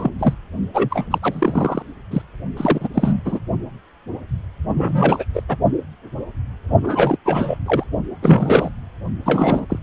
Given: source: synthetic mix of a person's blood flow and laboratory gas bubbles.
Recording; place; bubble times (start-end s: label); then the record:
Doppler ultrasound of blood flow; precordium
0.00-0.10 s: bubbles
0.19-0.34 s: bubbles
0.73-1.08 s: bubbles
1.10-1.18 s: bubbles
1.22-1.83 s: bubbles
2.10-2.22 s: bubbles
2.56-2.89 s: bubbles
2.94-3.40 s: bubbles
4.67-5.25 s: bubbles
5.34-5.43 s: bubbles
5.49-5.57 s: bubbles
6.83-7.17 s: bubbles
7.25-7.58 s: bubbles
7.66-7.83 s: bubbles
8.22-8.70 s: bubbles
9.25-9.66 s: bubbles
9.69-9.79 s: bubbles
From the record:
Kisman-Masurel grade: 333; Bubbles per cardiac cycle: rolling drumbeat, 9 or more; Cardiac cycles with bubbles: 50 to 99%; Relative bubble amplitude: loud (0.450 to 0.775); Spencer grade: 3 (all of the cardiac periods contain showers or single bubble signals, but not dominating or overriding the cardiac motion signals); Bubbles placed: only in the low amplitude regions of the cardiac cycle